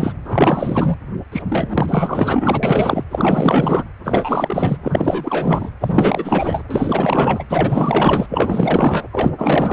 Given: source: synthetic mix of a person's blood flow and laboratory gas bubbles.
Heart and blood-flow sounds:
Doppler ultrasound of blood flow; precordium
0.00-0.14 s: bubbles
0.25-0.97 s: bubbles
1.31-1.43 s: bubbles
1.49-3.04 s: bubbles
3.11-3.85 s: bubbles
4.04-4.77 s: bubbles
4.83-5.69 s: bubbles
5.80-6.62 s: bubbles
6.70-7.44 s: bubbles
7.49-8.26 s: bubbles
8.29-9.04 s: bubbles
9.12-9.32 s: bubbles
9.38-9.73 s: bubbles
From the record:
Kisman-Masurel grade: 444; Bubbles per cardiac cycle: continuous sound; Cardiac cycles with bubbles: 100%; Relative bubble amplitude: maximal (0.775 to 0.999); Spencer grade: 4 (maximum detectable bubble signal sounding continuously throughout systole and diastole of every cardiac period, and overriding the amplitude of the normal cardiac signals); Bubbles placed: anywhere in the cardiac cycle

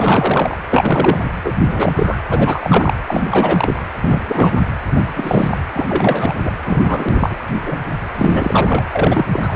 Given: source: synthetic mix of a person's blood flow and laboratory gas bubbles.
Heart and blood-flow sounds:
Doppler ultrasound of blood flow; precordium
0.00-0.57 s: bubbles
0.69-1.29 s: bubbles
1.44-1.52 s: bubbles
1.68-2.18 s: bubbles
2.29-2.93 s: bubbles
3.07-3.85 s: bubbles
4.00-4.22 s: bubbles
4.27-4.61 s: bubbles
4.96-5.01 s: bubbles
5.14-5.59 s: bubbles
5.72-6.34 s: bubbles
6.37-6.52 s: bubbles
6.64-7.38 s: bubbles
7.62-7.78 s: bubbles
8.15-8.83 s: bubbles
8.93-9.26 s: bubbles
9.33-9.56 s: bubbles
From the record:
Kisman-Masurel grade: 343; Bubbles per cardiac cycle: rolling drumbeat, 9 or more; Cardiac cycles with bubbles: 100%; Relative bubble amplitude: loud (0.450 to 0.775); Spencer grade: 3 (all of the cardiac periods contain showers or single bubble signals, but not dominating or overriding the cardiac motion signals); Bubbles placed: anywhere in the cardiac cycle

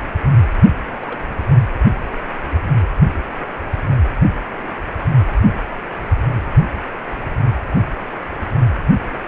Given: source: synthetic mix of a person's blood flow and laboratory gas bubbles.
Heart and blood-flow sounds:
Doppler ultrasound of blood flow; precordium
1.01-1.22 s: bubbles
From the record:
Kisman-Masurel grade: 111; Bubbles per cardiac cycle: 1 to 2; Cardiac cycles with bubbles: 1 to 10%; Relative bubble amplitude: barely perceptible (0.100 to 0.250); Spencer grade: 1 (occasional bubble signal discernible with the cardiac motion signal, with majority of cardiac periods free of bubbles); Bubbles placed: anywhere in the cardiac cycle

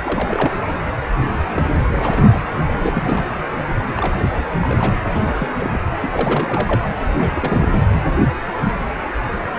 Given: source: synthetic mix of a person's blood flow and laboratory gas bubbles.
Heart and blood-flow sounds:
Doppler ultrasound of blood flow; precordium
0.02-0.51 s: bubbles
1.56-2.45 s: bubbles
2.68-3.36 s: bubbles
3.96-4.20 s: bubbles
4.22-4.46 s: bubbles
4.61-5.00 s: bubbles
5.16-5.22 s: bubbles
5.27-5.33 s: bubbles
5.38-5.48 s: bubbles
5.58-5.80 s: bubbles
6.01-6.89 s: bubbles
7.17-7.87 s: bubbles
From the record:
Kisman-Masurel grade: 332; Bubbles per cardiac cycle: rolling drumbeat, 9 or more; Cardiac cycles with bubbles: 50 to 99%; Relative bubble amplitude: moderate (0.250 to 0.450); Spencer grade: 3 (all of the cardiac periods contain showers or single bubble signals, but not dominating or overriding the cardiac motion signals); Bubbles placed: anywhere in the cardiac cycle

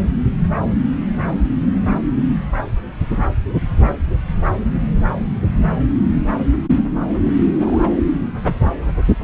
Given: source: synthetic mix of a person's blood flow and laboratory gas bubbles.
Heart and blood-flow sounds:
Doppler ultrasound of blood flow; subclavian vein
6.75-6.83 s: bubbles
7.24-7.33 s: bubbles
7.54-7.85 s: bubbles
From the record:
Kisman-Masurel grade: 122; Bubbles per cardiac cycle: 1 to 2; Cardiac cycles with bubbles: 10 to 50%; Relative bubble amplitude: moderate (0.250 to 0.450); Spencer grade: 2 (many but less than half of the cardiac periods contain bubble signals, singularly or in groups); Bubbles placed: anywhere in the cardiac cycle

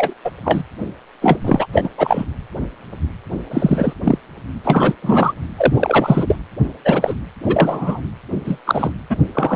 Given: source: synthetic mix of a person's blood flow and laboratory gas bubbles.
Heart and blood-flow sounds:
Doppler ultrasound of blood flow; precordium
0.00-0.14 s: bubbles
0.24-0.31 s: bubbles
0.44-0.62 s: bubbles
1.21-1.39 s: bubbles
1.44-1.67 s: bubbles
1.73-1.90 s: bubbles
1.98-2.24 s: bubbles
3.51-3.94 s: bubbles
4.04-4.18 s: bubbles
4.64-4.94 s: bubbles
5.02-5.32 s: bubbles
5.57-6.36 s: bubbles
6.85-7.14 s: bubbles
7.46-8.01 s: bubbles
8.45-8.59 s: bubbles
8.66-8.91 s: bubbles
9.10-9.17 s: bubbles
9.35-9.56 s: bubbles
From the record:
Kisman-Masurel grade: 233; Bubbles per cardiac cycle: several, 3 to 8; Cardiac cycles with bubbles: 50 to 99%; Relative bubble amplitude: loud (0.450 to 0.775); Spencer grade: 3 (all of the cardiac periods contain showers or single bubble signals, but not dominating or overriding the cardiac motion signals); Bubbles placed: anywhere in the cardiac cycle

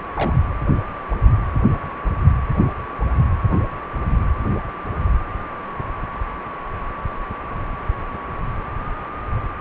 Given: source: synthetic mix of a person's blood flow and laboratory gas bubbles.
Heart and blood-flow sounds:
Doppler ultrasound of blood flow; precordium
0.16-0.38 s: bubbles
From the record:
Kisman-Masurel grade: 211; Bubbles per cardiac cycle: several, 3 to 8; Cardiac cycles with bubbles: 1 to 10%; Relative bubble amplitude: barely perceptible (0.100 to 0.250); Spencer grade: 1 (occasional bubble signal discernible with the cardiac motion signal, with majority of cardiac periods free of bubbles); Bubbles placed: anywhere in the cardiac cycle

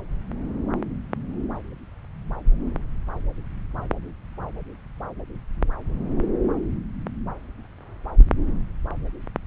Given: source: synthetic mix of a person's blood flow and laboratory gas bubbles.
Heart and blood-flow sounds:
Doppler ultrasound of blood flow; subclavian vein
no bubbles
From the record:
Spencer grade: 0 (complete lack of bubble signals)

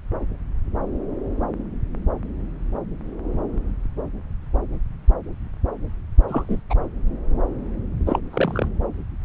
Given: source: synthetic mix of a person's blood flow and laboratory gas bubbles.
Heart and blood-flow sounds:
Doppler ultrasound of blood flow; subclavian vein
6.28-6.61 s: bubbles
6.70-6.75 s: bubbles
8.06-8.19 s: bubbles
8.30-8.68 s: bubbles
From the record:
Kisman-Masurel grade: 222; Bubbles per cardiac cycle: several, 3 to 8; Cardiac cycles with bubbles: 10 to 50%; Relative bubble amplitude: moderate (0.250 to 0.450); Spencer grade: 2 (many but less than half of the cardiac periods contain bubble signals, singularly or in groups); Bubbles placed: anywhere in the cardiac cycle

